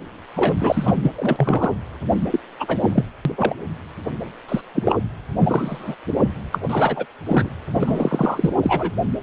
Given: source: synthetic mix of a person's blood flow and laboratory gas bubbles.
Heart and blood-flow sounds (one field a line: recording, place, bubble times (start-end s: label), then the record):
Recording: Doppler ultrasound of blood flow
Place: precordium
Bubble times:
0.36-0.54 s: bubbles
0.60-0.94 s: bubbles
1.03-1.09 s: bubbles
1.16-1.74 s: bubbles
2.30-2.40 s: bubbles
2.59-3.06 s: bubbles
3.25-3.32 s: bubbles
3.38-3.54 s: bubbles
4.49-4.61 s: bubbles
4.75-4.99 s: bubbles
5.40-5.96 s: bubbles
6.52-6.58 s: bubbles
6.69-7.06 s: bubbles
7.26-7.50 s: bubbles
7.74-8.50 s: bubbles
8.62-8.91 s: bubbles
From the record:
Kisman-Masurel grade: 232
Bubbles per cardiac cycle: several, 3 to 8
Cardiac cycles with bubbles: 50 to 99%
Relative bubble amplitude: moderate (0.250 to 0.450)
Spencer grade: 3 (all of the cardiac periods contain showers or single bubble signals, but not dominating or overriding the cardiac motion signals)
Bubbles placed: anywhere in the cardiac cycle